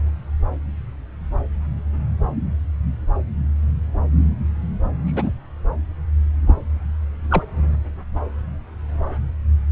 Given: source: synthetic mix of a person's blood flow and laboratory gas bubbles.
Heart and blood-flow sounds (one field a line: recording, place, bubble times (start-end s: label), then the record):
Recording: Doppler ultrasound of blood flow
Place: subclavian vein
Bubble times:
5.07-5.31 s: bubbles
6.47-6.63 s: bubbles
7.30-7.42 s: bubbles
From the record:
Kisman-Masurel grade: 122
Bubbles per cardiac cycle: 1 to 2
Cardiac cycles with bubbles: 10 to 50%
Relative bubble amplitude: moderate (0.250 to 0.450)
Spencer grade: 2 (many but less than half of the cardiac periods contain bubble signals, singularly or in groups)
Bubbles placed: anywhere in the cardiac cycle